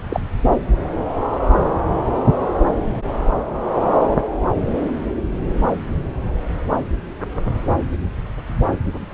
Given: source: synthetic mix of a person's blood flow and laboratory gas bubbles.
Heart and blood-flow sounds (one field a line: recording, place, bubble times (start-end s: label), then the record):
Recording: Doppler ultrasound of blood flow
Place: subclavian vein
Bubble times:
0.10-0.20 s: bubbles
From the record:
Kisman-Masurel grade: 123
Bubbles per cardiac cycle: 1 to 2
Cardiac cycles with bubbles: 10 to 50%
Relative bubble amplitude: loud (0.450 to 0.775)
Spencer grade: 2 (many but less than half of the cardiac periods contain bubble signals, singularly or in groups)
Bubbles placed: anywhere in the cardiac cycle